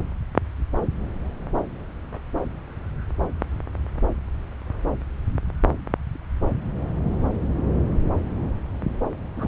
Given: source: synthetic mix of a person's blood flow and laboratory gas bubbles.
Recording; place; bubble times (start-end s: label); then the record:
Doppler ultrasound of blood flow; subclavian vein
9.37-9.47 s: bubbles
From the record:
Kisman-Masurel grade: 212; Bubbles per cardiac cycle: several, 3 to 8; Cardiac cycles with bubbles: 1 to 10%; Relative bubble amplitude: moderate (0.250 to 0.450); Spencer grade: 1 (occasional bubble signal discernible with the cardiac motion signal, with majority of cardiac periods free of bubbles); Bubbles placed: anywhere in the cardiac cycle